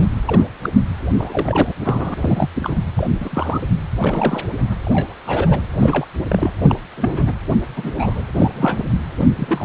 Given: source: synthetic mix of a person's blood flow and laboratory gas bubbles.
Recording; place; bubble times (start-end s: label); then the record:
Doppler ultrasound of blood flow; precordium
0.00-0.08 s: bubbles
0.27-0.45 s: bubbles
0.62-0.69 s: bubbles
1.17-1.74 s: bubbles
1.81-2.50 s: bubbles
2.55-2.78 s: bubbles
2.96-3.08 s: bubbles
3.20-3.61 s: bubbles
4.01-4.42 s: bubbles
4.85-5.14 s: bubbles
5.25-5.64 s: bubbles
5.78-6.05 s: bubbles
6.28-6.52 s: bubbles
6.62-6.77 s: bubbles
6.97-7.34 s: bubbles
7.76-7.93 s: bubbles
7.96-8.23 s: bubbles
8.34-8.51 s: bubbles
8.54-8.83 s: bubbles
9.17-9.27 s: bubbles
9.36-9.65 s: bubbles
From the record:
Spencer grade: 3 (all of the cardiac periods contain showers or single bubble signals, but not dominating or overriding the cardiac motion signals); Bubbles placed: anywhere in the cardiac cycle